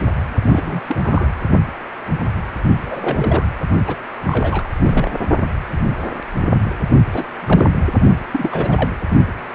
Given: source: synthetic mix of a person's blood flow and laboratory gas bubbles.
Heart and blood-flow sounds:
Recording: Doppler ultrasound of blood flow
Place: precordium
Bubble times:
0.43-0.80 s: bubbles
0.86-0.97 s: bubbles
1.02-1.28 s: bubbles
2.82-3.46 s: bubbles
3.87-3.96 s: bubbles
4.26-4.69 s: bubbles
4.82-5.11 s: bubbles
7.11-7.25 s: bubbles
7.38-7.71 s: bubbles
8.32-8.90 s: bubbles
From the record:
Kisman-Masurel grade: 232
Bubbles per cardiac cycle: several, 3 to 8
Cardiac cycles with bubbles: 50 to 99%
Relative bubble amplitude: moderate (0.250 to 0.450)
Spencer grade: 3 (all of the cardiac periods contain showers or single bubble signals, but not dominating or overriding the cardiac motion signals)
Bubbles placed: only in the low amplitude regions of the cardiac cycle

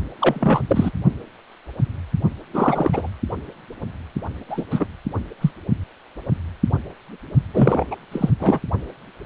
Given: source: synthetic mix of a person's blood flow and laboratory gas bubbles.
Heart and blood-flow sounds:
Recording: Doppler ultrasound of blood flow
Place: precordium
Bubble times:
0.21-0.62 s: bubbles
0.69-0.91 s: bubbles
2.54-3.10 s: bubbles
4.49-4.64 s: bubbles
4.70-4.85 s: bubbles
5.40-5.51 s: bubbles
7.53-7.84 s: bubbles
7.91-7.96 s: bubbles
8.12-8.29 s: bubbles
8.39-8.60 s: bubbles
From the record:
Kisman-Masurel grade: 233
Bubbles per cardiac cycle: several, 3 to 8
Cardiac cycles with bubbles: 50 to 99%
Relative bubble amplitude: loud (0.450 to 0.775)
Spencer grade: 3 (all of the cardiac periods contain showers or single bubble signals, but not dominating or overriding the cardiac motion signals)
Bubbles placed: only in the low amplitude regions of the cardiac cycle

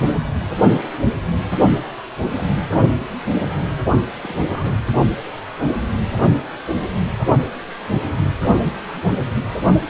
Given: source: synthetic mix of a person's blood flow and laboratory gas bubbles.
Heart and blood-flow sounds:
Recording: Doppler ultrasound of blood flow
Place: precordium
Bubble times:
2.21-2.48 s: bubbles
2.56-2.62 s: bubbles
4.17-4.20 s: bubbles
4.23-4.36 s: bubbles
4.38-4.74 s: bubbles
From the record:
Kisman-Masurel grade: 221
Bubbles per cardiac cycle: several, 3 to 8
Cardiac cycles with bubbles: 10 to 50%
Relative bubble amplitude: barely perceptible (0.100 to 0.250)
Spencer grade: 2 (many but less than half of the cardiac periods contain bubble signals, singularly or in groups)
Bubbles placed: only in the low amplitude regions of the cardiac cycle

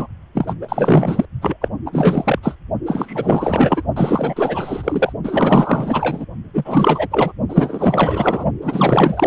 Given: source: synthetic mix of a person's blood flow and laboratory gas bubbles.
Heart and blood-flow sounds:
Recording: Doppler ultrasound of blood flow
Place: precordium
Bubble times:
0.00-0.07 s: bubbles
0.34-0.55 s: bubbles
0.61-1.25 s: bubbles
1.42-1.56 s: bubbles
1.61-1.69 s: bubbles
1.85-2.39 s: bubbles
2.43-2.55 s: bubbles
2.85-3.82 s: bubbles
3.96-5.12 s: bubbles
5.23-6.25 s: bubbles
6.53-7.08 s: bubbles
7.10-7.32 s: bubbles
7.48-8.45 s: bubbles
8.61-9.27 s: bubbles
From the record:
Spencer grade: 4 (maximum detectable bubble signal sounding continuously throughout systole and diastole of every cardiac period, and overriding the amplitude of the normal cardiac signals)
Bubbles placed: only in the low amplitude regions of the cardiac cycle

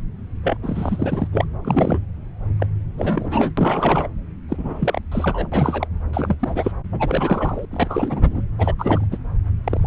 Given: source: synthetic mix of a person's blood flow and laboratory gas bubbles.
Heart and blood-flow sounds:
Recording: Doppler ultrasound of blood flow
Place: subclavian vein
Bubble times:
0.43-0.57 s: bubbles
0.63-1.27 s: bubbles
1.33-1.45 s: bubbles
1.62-1.99 s: bubbles
2.60-2.66 s: bubbles
2.97-3.52 s: bubbles
3.57-4.08 s: bubbles
4.49-5.00 s: bubbles
5.12-5.48 s: bubbles
5.51-5.87 s: bubbles
6.13-6.35 s: bubbles
6.40-6.71 s: bubbles
6.92-7.66 s: bubbles
7.71-8.42 s: bubbles
8.58-8.74 s: bubbles
8.78-9.06 s: bubbles
9.11-9.17 s: bubbles
9.64-9.87 s: bubbles
From the record:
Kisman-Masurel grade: 332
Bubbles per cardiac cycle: rolling drumbeat, 9 or more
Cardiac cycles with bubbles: 50 to 99%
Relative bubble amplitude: moderate (0.250 to 0.450)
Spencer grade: 3 (all of the cardiac periods contain showers or single bubble signals, but not dominating or overriding the cardiac motion signals)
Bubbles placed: anywhere in the cardiac cycle

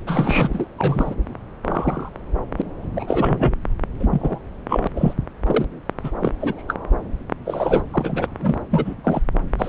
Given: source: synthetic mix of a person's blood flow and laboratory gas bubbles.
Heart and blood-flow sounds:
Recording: Doppler ultrasound of blood flow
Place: subclavian vein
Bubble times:
0.07-0.67 s: bubbles
0.78-1.15 s: bubbles
1.63-2.10 s: bubbles
2.58-2.62 s: bubbles
2.96-3.54 s: bubbles
3.99-4.08 s: bubbles
4.10-4.39 s: bubbles
4.69-4.88 s: bubbles
4.96-5.14 s: bubbles
5.47-5.65 s: bubbles
6.04-6.11 s: bubbles
6.21-6.33 s: bubbles
6.41-6.63 s: bubbles
6.68-6.75 s: bubbles
7.45-7.82 s: bubbles
7.93-8.27 s: bubbles
8.38-8.56 s: bubbles
8.71-8.95 s: bubbles
9.04-9.21 s: bubbles
9.59-9.69 s: bubbles
From the record:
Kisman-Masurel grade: 242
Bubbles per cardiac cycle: several, 3 to 8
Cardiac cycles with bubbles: 100%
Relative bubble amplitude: moderate (0.250 to 0.450)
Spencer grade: 3 (all of the cardiac periods contain showers or single bubble signals, but not dominating or overriding the cardiac motion signals)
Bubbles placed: anywhere in the cardiac cycle

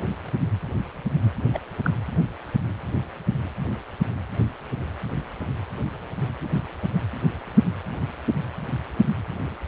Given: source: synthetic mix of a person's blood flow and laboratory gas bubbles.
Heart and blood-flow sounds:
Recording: Doppler ultrasound of blood flow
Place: precordium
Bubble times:
1.53-1.58 s: bubbles
1.83-1.90 s: bubbles
From the record:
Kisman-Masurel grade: 111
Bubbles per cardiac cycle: 1 to 2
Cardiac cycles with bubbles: 1 to 10%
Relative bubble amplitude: barely perceptible (0.100 to 0.250)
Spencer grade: 1 (occasional bubble signal discernible with the cardiac motion signal, with majority of cardiac periods free of bubbles)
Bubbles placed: anywhere in the cardiac cycle

